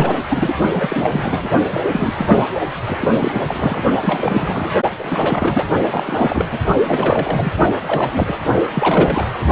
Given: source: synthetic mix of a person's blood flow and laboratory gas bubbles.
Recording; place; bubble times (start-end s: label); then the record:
Doppler ultrasound of blood flow; precordium
0.00-0.18 s: bubbles
0.29-0.54 s: bubbles
0.73-1.50 s: bubbles
1.72-1.80 s: bubbles
1.92-2.13 s: bubbles
2.17-2.42 s: bubbles
2.87-3.08 s: bubbles
3.13-3.42 s: bubbles
3.48-3.83 s: bubbles
4.02-4.74 s: bubbles
4.99-5.64 s: bubbles
5.89-6.46 s: bubbles
6.50-6.59 s: bubbles
6.85-7.52 s: bubbles
7.86-8.36 s: bubbles
8.72-9.33 s: bubbles
From the record:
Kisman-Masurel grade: 342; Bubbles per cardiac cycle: rolling drumbeat, 9 or more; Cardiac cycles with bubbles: 100%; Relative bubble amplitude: moderate (0.250 to 0.450); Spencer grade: 3 (all of the cardiac periods contain showers or single bubble signals, but not dominating or overriding the cardiac motion signals); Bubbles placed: only in the low amplitude regions of the cardiac cycle